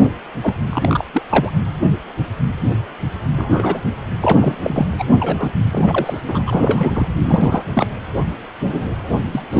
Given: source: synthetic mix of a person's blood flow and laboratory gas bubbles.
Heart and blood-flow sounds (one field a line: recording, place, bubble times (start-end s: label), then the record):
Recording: Doppler ultrasound of blood flow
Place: precordium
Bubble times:
0.00-0.10 s: bubbles
0.42-0.54 s: bubbles
0.70-1.04 s: bubbles
1.13-1.22 s: bubbles
1.29-1.52 s: bubbles
3.36-3.82 s: bubbles
4.20-4.92 s: bubbles
4.98-5.04 s: bubbles
5.20-5.52 s: bubbles
5.71-6.21 s: bubbles
6.26-6.44 s: bubbles
6.46-7.10 s: bubbles
7.25-7.63 s: bubbles
7.74-7.87 s: bubbles
9.31-9.42 s: bubbles
9.49-9.60 s: bubbles
From the record:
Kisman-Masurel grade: 232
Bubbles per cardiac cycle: several, 3 to 8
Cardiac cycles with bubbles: 50 to 99%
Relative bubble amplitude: moderate (0.250 to 0.450)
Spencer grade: 3 (all of the cardiac periods contain showers or single bubble signals, but not dominating or overriding the cardiac motion signals)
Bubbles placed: anywhere in the cardiac cycle